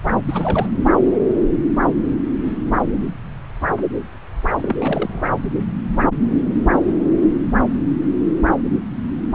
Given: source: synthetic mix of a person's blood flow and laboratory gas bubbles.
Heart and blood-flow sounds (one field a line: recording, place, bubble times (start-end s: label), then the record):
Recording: Doppler ultrasound of blood flow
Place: subclavian vein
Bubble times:
0.28-0.68 s: bubbles
4.56-5.26 s: bubbles
From the record:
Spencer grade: 1 (occasional bubble signal discernible with the cardiac motion signal, with majority of cardiac periods free of bubbles)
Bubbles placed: anywhere in the cardiac cycle